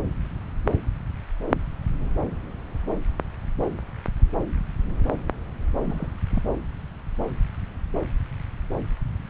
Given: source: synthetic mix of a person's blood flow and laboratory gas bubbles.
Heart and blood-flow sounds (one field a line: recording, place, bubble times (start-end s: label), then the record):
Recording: Doppler ultrasound of blood flow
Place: subclavian vein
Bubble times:
5.79-6.11 s: bubbles
6.30-6.41 s: bubbles
From the record:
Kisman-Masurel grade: 211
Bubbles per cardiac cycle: several, 3 to 8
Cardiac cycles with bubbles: 1 to 10%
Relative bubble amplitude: barely perceptible (0.100 to 0.250)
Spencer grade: 1 (occasional bubble signal discernible with the cardiac motion signal, with majority of cardiac periods free of bubbles)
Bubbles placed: anywhere in the cardiac cycle